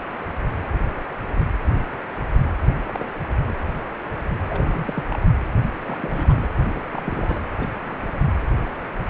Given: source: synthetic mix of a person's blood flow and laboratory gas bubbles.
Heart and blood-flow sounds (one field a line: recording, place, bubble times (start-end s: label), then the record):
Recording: Doppler ultrasound of blood flow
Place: precordium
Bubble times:
2.88-3.08 s: bubbles
3.17-3.58 s: bubbles
4.47-5.17 s: bubbles
5.20-5.26 s: bubbles
5.85-6.49 s: bubbles
6.62-6.80 s: bubbles
6.86-7.42 s: bubbles
7.58-7.72 s: bubbles
7.79-7.96 s: bubbles
7.98-8.32 s: bubbles
From the record:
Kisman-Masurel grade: 221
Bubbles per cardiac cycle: several, 3 to 8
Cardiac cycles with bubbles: 10 to 50%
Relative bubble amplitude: barely perceptible (0.100 to 0.250)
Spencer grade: 2 (many but less than half of the cardiac periods contain bubble signals, singularly or in groups)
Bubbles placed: anywhere in the cardiac cycle